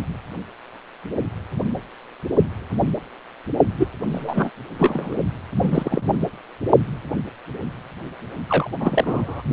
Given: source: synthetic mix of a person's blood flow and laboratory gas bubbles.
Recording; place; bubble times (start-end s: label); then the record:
Doppler ultrasound of blood flow; precordium
3.79-3.88 s: bubbles
4.09-4.50 s: bubbles
4.78-5.15 s: bubbles
5.62-6.01 s: bubbles
6.13-6.18 s: bubbles
8.48-8.70 s: bubbles
8.80-9.43 s: bubbles
From the record:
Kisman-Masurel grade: 222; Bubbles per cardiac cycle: several, 3 to 8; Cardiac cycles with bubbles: 10 to 50%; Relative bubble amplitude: moderate (0.250 to 0.450); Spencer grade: 2 (many but less than half of the cardiac periods contain bubble signals, singularly or in groups); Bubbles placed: only in the low amplitude regions of the cardiac cycle